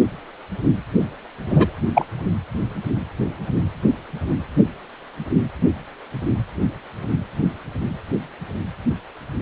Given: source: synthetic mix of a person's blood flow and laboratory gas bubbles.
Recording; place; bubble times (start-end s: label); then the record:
Doppler ultrasound of blood flow; precordium
1.49-1.74 s: bubbles
1.94-2.05 s: bubbles
From the record:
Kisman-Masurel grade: 123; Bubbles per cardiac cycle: 1 to 2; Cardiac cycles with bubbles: 10 to 50%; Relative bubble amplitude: loud (0.450 to 0.775); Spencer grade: 2 (many but less than half of the cardiac periods contain bubble signals, singularly or in groups); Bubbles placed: anywhere in the cardiac cycle